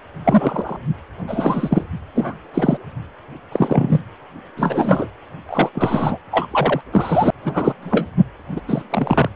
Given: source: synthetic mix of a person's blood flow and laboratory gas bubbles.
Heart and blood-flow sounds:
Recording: Doppler ultrasound of blood flow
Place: precordium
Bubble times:
0.24-0.77 s: bubbles
1.28-1.85 s: bubbles
2.15-2.34 s: bubbles
2.54-2.78 s: bubbles
3.52-4.01 s: bubbles
4.57-5.08 s: bubbles
5.49-5.71 s: bubbles
5.75-6.17 s: bubbles
6.32-6.47 s: bubbles
6.50-6.81 s: bubbles
6.92-7.31 s: bubbles
7.45-7.75 s: bubbles
7.82-8.06 s: bubbles
8.56-8.60 s: bubbles
8.67-8.82 s: bubbles
8.89-9.29 s: bubbles
From the record:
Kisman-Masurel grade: 243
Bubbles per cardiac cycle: several, 3 to 8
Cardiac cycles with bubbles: 100%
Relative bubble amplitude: loud (0.450 to 0.775)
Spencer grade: 3 (all of the cardiac periods contain showers or single bubble signals, but not dominating or overriding the cardiac motion signals)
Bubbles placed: anywhere in the cardiac cycle

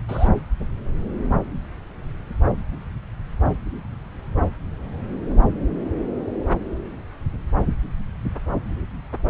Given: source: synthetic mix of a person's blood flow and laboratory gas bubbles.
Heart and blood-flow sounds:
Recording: Doppler ultrasound of blood flow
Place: subclavian vein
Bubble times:
0.08-0.28 s: bubbles
From the record:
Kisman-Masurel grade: 122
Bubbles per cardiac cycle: 1 to 2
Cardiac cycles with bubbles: 10 to 50%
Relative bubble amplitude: moderate (0.250 to 0.450)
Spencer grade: 2 (many but less than half of the cardiac periods contain bubble signals, singularly or in groups)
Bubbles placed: anywhere in the cardiac cycle

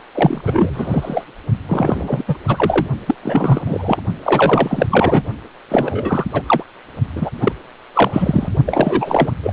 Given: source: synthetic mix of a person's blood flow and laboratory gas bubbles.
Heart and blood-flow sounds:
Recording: Doppler ultrasound of blood flow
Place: precordium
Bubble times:
0.14-0.42 s: bubbles
0.44-1.24 s: bubbles
1.68-2.24 s: bubbles
2.27-2.37 s: bubbles
2.48-2.86 s: bubbles
3.06-3.15 s: bubbles
3.22-3.62 s: bubbles
3.65-4.02 s: bubbles
4.23-4.87 s: bubbles
4.90-5.22 s: bubbles
5.69-6.26 s: bubbles
6.33-6.42 s: bubbles
6.47-6.64 s: bubbles
7.15-7.29 s: bubbles
7.40-7.52 s: bubbles
7.94-8.49 s: bubbles
8.65-9.33 s: bubbles
9.44-9.53 s: bubbles
From the record:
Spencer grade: 3 (all of the cardiac periods contain showers or single bubble signals, but not dominating or overriding the cardiac motion signals)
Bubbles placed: only in the low amplitude regions of the cardiac cycle

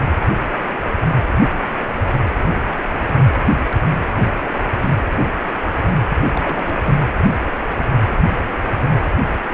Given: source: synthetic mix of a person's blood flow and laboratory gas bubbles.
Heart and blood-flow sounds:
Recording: Doppler ultrasound of blood flow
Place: precordium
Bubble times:
6.33-6.74 s: bubbles
6.85-7.00 s: bubbles
From the record:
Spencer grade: 1 (occasional bubble signal discernible with the cardiac motion signal, with majority of cardiac periods free of bubbles)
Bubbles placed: anywhere in the cardiac cycle

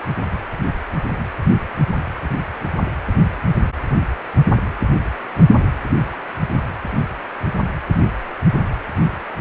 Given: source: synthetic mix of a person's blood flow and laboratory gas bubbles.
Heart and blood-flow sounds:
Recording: Doppler ultrasound of blood flow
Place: precordium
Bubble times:
no bubbles
From the record:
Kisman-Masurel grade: 000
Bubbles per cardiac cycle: 0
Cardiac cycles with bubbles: 0%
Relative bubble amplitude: no bubbles discernible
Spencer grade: 0 (complete lack of bubble signals)

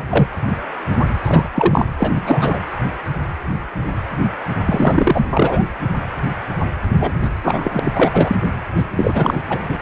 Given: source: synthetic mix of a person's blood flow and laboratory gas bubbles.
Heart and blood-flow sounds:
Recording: Doppler ultrasound of blood flow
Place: precordium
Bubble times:
0.00-0.05 s: bubbles
0.10-0.29 s: bubbles
1.23-1.48 s: bubbles
1.53-1.85 s: bubbles
1.98-2.12 s: bubbles
2.15-2.60 s: bubbles
4.66-5.26 s: bubbles
5.33-5.65 s: bubbles
6.98-7.12 s: bubbles
7.21-7.29 s: bubbles
7.43-7.79 s: bubbles
7.84-7.92 s: bubbles
7.95-8.36 s: bubbles
8.77-8.83 s: bubbles
8.96-9.39 s: bubbles
9.49-9.62 s: bubbles
9.68-9.77 s: bubbles
From the record:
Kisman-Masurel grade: 333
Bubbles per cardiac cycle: rolling drumbeat, 9 or more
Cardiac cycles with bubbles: 50 to 99%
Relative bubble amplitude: loud (0.450 to 0.775)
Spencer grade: 3 (all of the cardiac periods contain showers or single bubble signals, but not dominating or overriding the cardiac motion signals)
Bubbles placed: anywhere in the cardiac cycle

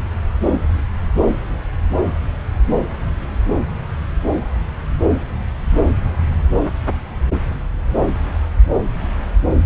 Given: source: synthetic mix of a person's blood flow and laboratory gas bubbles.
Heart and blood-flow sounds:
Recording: Doppler ultrasound of blood flow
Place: subclavian vein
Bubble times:
no bubbles
From the record:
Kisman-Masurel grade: 000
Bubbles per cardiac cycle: 0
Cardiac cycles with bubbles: 0%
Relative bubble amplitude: no bubbles discernible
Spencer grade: 0 (complete lack of bubble signals)

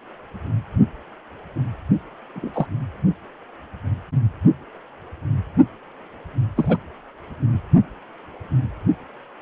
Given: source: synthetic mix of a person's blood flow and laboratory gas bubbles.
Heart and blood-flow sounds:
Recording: Doppler ultrasound of blood flow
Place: precordium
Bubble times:
2.35-2.67 s: bubbles
6.56-6.77 s: bubbles
From the record:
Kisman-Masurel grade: 122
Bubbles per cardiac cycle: 1 to 2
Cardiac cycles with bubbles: 10 to 50%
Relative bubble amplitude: moderate (0.250 to 0.450)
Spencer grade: 2 (many but less than half of the cardiac periods contain bubble signals, singularly or in groups)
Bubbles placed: only in the low amplitude regions of the cardiac cycle

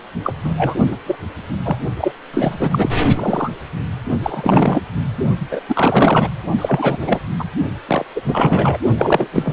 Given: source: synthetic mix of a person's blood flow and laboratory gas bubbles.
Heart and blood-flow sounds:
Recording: Doppler ultrasound of blood flow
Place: precordium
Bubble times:
0.24-0.34 s: bubbles
0.44-0.80 s: bubbles
0.91-0.97 s: bubbles
1.06-1.16 s: bubbles
1.64-1.77 s: bubbles
1.97-2.12 s: bubbles
2.33-2.89 s: bubbles
3.16-3.50 s: bubbles
4.22-4.82 s: bubbles
5.50-5.60 s: bubbles
5.68-6.28 s: bubbles
6.58-6.97 s: bubbles
7.00-7.19 s: bubbles
7.38-7.44 s: bubbles
7.87-8.05 s: bubbles
8.15-8.21 s: bubbles
8.25-8.79 s: bubbles
8.97-9.29 s: bubbles
9.33-9.53 s: bubbles
From the record:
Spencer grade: 3 (all of the cardiac periods contain showers or single bubble signals, but not dominating or overriding the cardiac motion signals)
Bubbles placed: only in the low amplitude regions of the cardiac cycle

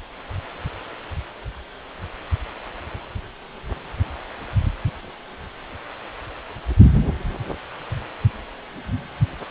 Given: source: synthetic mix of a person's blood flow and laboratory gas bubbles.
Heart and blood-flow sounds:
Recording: Doppler ultrasound of blood flow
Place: precordium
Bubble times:
no bubbles
From the record:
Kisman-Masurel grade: 000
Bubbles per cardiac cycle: 0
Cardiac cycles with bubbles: 0%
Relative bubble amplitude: no bubbles discernible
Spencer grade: 0 (complete lack of bubble signals)

